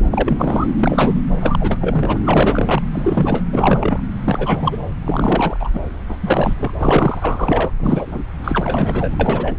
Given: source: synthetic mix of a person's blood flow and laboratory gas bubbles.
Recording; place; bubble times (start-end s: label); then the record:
Doppler ultrasound of blood flow; subclavian vein
0.04-0.70 s: bubbles
0.77-1.21 s: bubbles
1.40-2.18 s: bubbles
2.25-2.82 s: bubbles
2.93-3.43 s: bubbles
3.52-4.01 s: bubbles
4.25-4.77 s: bubbles
5.04-5.57 s: bubbles
5.60-5.69 s: bubbles
5.73-5.80 s: bubbles
6.08-6.17 s: bubbles
6.21-6.54 s: bubbles
6.58-6.71 s: bubbles
6.80-7.72 s: bubbles
7.79-8.25 s: bubbles
8.44-9.16 s: bubbles
9.19-9.55 s: bubbles
From the record:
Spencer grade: 3 (all of the cardiac periods contain showers or single bubble signals, but not dominating or overriding the cardiac motion signals); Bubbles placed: anywhere in the cardiac cycle